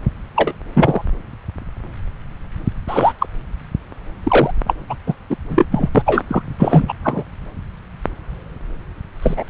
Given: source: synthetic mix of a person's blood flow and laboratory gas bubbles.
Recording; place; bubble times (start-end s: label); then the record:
Doppler ultrasound of blood flow; subclavian vein
0.36-0.52 s: bubbles
0.73-1.05 s: bubbles
2.88-3.13 s: bubbles
3.19-3.27 s: bubbles
4.24-4.51 s: bubbles
4.67-4.75 s: bubbles
4.89-4.97 s: bubbles
5.06-5.13 s: bubbles
5.30-5.36 s: bubbles
5.49-5.65 s: bubbles
5.71-5.89 s: bubbles
5.95-6.24 s: bubbles
6.28-6.42 s: bubbles
6.59-6.85 s: bubbles
6.88-6.94 s: bubbles
7.04-7.24 s: bubbles
9.22-9.44 s: bubbles
From the record:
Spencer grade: 3 (all of the cardiac periods contain showers or single bubble signals, but not dominating or overriding the cardiac motion signals); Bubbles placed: anywhere in the cardiac cycle